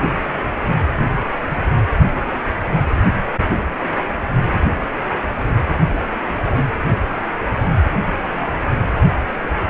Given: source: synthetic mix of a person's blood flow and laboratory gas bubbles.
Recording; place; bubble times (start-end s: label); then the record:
Doppler ultrasound of blood flow; precordium
no bubbles
From the record:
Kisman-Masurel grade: 000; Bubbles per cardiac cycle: 0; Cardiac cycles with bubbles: 0%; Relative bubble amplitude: no bubbles discernible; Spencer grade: 0 (complete lack of bubble signals)